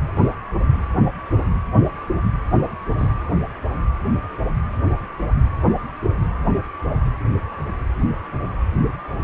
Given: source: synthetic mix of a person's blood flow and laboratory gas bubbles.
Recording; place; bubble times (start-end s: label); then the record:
Doppler ultrasound of blood flow; precordium
2.98-3.12 s: bubbles
From the record:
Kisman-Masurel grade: 112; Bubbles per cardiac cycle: 1 to 2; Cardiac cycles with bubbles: 1 to 10%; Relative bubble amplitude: moderate (0.250 to 0.450); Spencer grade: 1 (occasional bubble signal discernible with the cardiac motion signal, with majority of cardiac periods free of bubbles); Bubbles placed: anywhere in the cardiac cycle